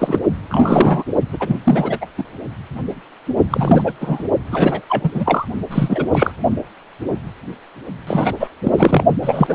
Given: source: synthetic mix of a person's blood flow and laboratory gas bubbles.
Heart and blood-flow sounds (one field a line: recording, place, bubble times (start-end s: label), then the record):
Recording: Doppler ultrasound of blood flow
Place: precordium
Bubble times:
0.00-0.21 s: bubbles
0.50-1.03 s: bubbles
1.32-1.60 s: bubbles
1.64-1.98 s: bubbles
2.01-2.06 s: bubbles
2.17-2.23 s: bubbles
3.50-3.93 s: bubbles
4.00-4.24 s: bubbles
4.51-4.81 s: bubbles
4.88-5.10 s: bubbles
5.14-5.46 s: bubbles
5.71-6.07 s: bubbles
6.12-6.32 s: bubbles
8.06-8.34 s: bubbles
8.39-8.49 s: bubbles
8.63-9.04 s: bubbles
9.22-9.55 s: bubbles
From the record:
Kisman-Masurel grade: 333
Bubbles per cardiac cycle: rolling drumbeat, 9 or more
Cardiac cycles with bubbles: 50 to 99%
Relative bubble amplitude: loud (0.450 to 0.775)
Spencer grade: 3 (all of the cardiac periods contain showers or single bubble signals, but not dominating or overriding the cardiac motion signals)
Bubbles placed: only in the low amplitude regions of the cardiac cycle